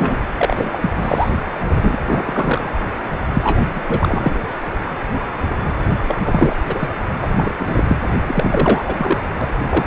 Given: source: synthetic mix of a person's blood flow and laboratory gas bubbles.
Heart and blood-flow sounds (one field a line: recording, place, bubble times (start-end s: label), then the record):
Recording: Doppler ultrasound of blood flow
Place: precordium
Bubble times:
0.00-0.17 s: bubbles
0.37-0.78 s: bubbles
0.81-0.89 s: bubbles
0.94-1.29 s: bubbles
1.61-1.98 s: bubbles
2.06-2.72 s: bubbles
3.33-3.59 s: bubbles
3.75-3.81 s: bubbles
3.88-4.40 s: bubbles
6.08-6.57 s: bubbles
6.65-6.89 s: bubbles
7.21-7.54 s: bubbles
7.58-7.97 s: bubbles
8.23-9.18 s: bubbles
9.41-9.48 s: bubbles
9.61-9.87 s: bubbles
From the record:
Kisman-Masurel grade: 333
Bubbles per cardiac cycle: rolling drumbeat, 9 or more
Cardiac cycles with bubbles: 50 to 99%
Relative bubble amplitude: loud (0.450 to 0.775)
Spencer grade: 3 (all of the cardiac periods contain showers or single bubble signals, but not dominating or overriding the cardiac motion signals)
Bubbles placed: anywhere in the cardiac cycle